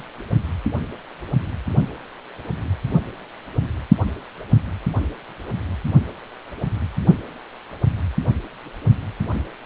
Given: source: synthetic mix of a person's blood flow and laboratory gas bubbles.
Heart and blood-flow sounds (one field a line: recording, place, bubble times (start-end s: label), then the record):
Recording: Doppler ultrasound of blood flow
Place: precordium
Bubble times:
0.00-0.04 s: bubbles
From the record:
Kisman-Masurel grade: 121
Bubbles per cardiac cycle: 1 to 2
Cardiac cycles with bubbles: 10 to 50%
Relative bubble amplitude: barely perceptible (0.100 to 0.250)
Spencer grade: 2 (many but less than half of the cardiac periods contain bubble signals, singularly or in groups)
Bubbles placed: only in the low amplitude regions of the cardiac cycle